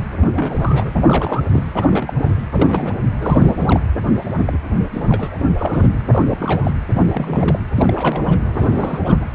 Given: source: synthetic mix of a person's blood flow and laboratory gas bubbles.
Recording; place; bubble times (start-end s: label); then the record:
Doppler ultrasound of blood flow; precordium
0.19-0.29 s: bubbles
0.35-0.91 s: bubbles
0.94-1.42 s: bubbles
1.53-1.63 s: bubbles
1.72-2.13 s: bubbles
2.17-2.37 s: bubbles
2.51-3.06 s: bubbles
3.20-3.83 s: bubbles
4.38-4.44 s: bubbles
4.47-4.58 s: bubbles
4.93-5.48 s: bubbles
5.59-5.98 s: bubbles
6.07-6.25 s: bubbles
6.28-6.74 s: bubbles
6.93-7.04 s: bubbles
7.08-7.59 s: bubbles
7.75-8.40 s: bubbles
8.54-8.99 s: bubbles
9.05-9.23 s: bubbles
From the record:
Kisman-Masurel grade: 342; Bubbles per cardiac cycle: rolling drumbeat, 9 or more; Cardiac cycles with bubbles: 100%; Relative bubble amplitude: moderate (0.250 to 0.450); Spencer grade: 3 (all of the cardiac periods contain showers or single bubble signals, but not dominating or overriding the cardiac motion signals); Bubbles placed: anywhere in the cardiac cycle